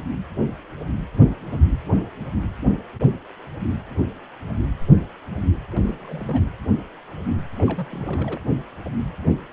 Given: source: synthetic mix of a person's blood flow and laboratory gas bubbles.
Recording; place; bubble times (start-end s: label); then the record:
Doppler ultrasound of blood flow; precordium
5.70-5.96 s: bubbles
6.00-6.50 s: bubbles
7.58-8.40 s: bubbles
From the record:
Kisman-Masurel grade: 221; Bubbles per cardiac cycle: several, 3 to 8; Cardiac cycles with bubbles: 10 to 50%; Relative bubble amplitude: barely perceptible (0.100 to 0.250); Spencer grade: 2 (many but less than half of the cardiac periods contain bubble signals, singularly or in groups); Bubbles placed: anywhere in the cardiac cycle